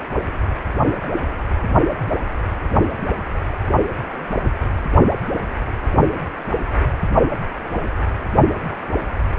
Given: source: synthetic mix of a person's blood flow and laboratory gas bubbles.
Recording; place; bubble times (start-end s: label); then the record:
Doppler ultrasound of blood flow; precordium
no bubbles
From the record:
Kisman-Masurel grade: 000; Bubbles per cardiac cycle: 0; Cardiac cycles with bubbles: 0%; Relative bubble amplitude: no bubbles discernible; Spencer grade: 0 (complete lack of bubble signals)